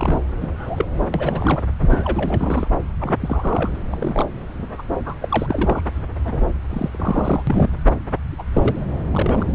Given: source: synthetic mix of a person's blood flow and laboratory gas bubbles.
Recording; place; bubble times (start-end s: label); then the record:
Doppler ultrasound of blood flow; subclavian vein
0.00-0.20 s: bubbles
0.40-0.51 s: bubbles
0.58-0.85 s: bubbles
1.14-1.62 s: bubbles
1.79-2.68 s: bubbles
3.00-3.17 s: bubbles
3.20-3.72 s: bubbles
3.75-3.77 s: bubbles
3.90-4.25 s: bubbles
4.45-4.69 s: bubbles
4.78-4.82 s: bubbles
5.05-5.14 s: bubbles
5.21-5.88 s: bubbles
6.23-6.51 s: bubbles
6.69-6.90 s: bubbles
6.93-7.43 s: bubbles
7.47-7.69 s: bubbles
8.38-8.43 s: bubbles
8.53-8.84 s: bubbles
9.12-9.49 s: bubbles
From the record:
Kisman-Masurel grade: 232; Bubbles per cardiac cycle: several, 3 to 8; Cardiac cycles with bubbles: 50 to 99%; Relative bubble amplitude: moderate (0.250 to 0.450); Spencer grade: 3 (all of the cardiac periods contain showers or single bubble signals, but not dominating or overriding the cardiac motion signals); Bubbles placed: anywhere in the cardiac cycle